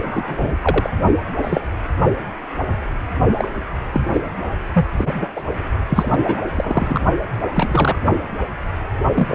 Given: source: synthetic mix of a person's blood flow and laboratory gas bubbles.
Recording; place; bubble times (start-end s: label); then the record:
Doppler ultrasound of blood flow; precordium
0.02-0.55 s: bubbles
0.62-0.90 s: bubbles
1.38-1.60 s: bubbles
3.37-3.48 s: bubbles
3.92-4.01 s: bubbles
4.13-4.21 s: bubbles
4.73-4.86 s: bubbles
4.98-5.28 s: bubbles
5.36-5.43 s: bubbles
5.89-6.20 s: bubbles
6.24-6.44 s: bubbles
6.55-7.02 s: bubbles
7.53-7.99 s: bubbles
9.15-9.35 s: bubbles
From the record:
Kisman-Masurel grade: 233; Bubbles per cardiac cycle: several, 3 to 8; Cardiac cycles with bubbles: 50 to 99%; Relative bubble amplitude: loud (0.450 to 0.775); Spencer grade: 3 (all of the cardiac periods contain showers or single bubble signals, but not dominating or overriding the cardiac motion signals); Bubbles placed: only in the low amplitude regions of the cardiac cycle